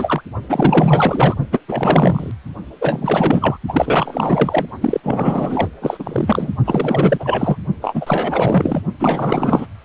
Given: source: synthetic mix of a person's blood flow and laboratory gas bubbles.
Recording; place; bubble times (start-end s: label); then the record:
Doppler ultrasound of blood flow; precordium
0.00-0.21 s: bubbles
0.49-1.35 s: bubbles
1.52-1.60 s: bubbles
1.68-2.31 s: bubbles
2.81-3.57 s: bubbles
3.67-4.66 s: bubbles
4.81-5.00 s: bubbles
5.03-5.68 s: bubbles
5.82-6.52 s: bubbles
6.65-7.57 s: bubbles
7.82-8.81 s: bubbles
8.99-9.66 s: bubbles
From the record:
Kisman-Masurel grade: 444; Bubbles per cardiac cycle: continuous sound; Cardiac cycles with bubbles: 100%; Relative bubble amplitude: maximal (0.775 to 0.999); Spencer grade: 4 (maximum detectable bubble signal sounding continuously throughout systole and diastole of every cardiac period, and overriding the amplitude of the normal cardiac signals); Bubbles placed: only in the low amplitude regions of the cardiac cycle